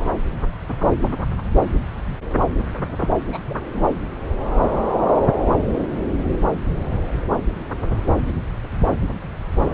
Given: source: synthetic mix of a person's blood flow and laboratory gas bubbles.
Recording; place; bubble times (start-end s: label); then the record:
Doppler ultrasound of blood flow; subclavian vein
2.98-3.11 s: bubbles
3.32-3.39 s: bubbles
3.49-3.55 s: bubbles
3.73-3.88 s: bubbles
From the record:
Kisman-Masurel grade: 211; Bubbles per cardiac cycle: several, 3 to 8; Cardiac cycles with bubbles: 1 to 10%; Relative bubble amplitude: barely perceptible (0.100 to 0.250); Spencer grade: 1 (occasional bubble signal discernible with the cardiac motion signal, with majority of cardiac periods free of bubbles); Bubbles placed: anywhere in the cardiac cycle